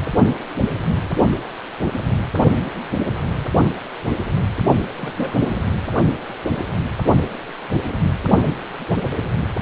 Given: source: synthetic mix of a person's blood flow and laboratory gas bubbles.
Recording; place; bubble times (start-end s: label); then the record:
Doppler ultrasound of blood flow; precordium
4.96-5.34 s: bubbles
5.40-5.62 s: bubbles
From the record:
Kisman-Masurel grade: 211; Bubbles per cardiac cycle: several, 3 to 8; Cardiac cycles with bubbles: 1 to 10%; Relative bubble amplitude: barely perceptible (0.100 to 0.250); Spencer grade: 1 (occasional bubble signal discernible with the cardiac motion signal, with majority of cardiac periods free of bubbles); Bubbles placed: only in the low amplitude regions of the cardiac cycle